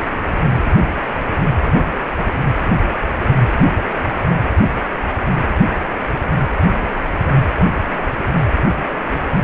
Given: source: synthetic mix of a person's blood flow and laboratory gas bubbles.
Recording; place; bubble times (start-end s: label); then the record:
Doppler ultrasound of blood flow; precordium
0.03-0.18 s: bubbles
From the record:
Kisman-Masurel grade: 111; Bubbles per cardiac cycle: 1 to 2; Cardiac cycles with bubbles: 1 to 10%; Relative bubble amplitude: barely perceptible (0.100 to 0.250); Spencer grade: 1 (occasional bubble signal discernible with the cardiac motion signal, with majority of cardiac periods free of bubbles); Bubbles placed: anywhere in the cardiac cycle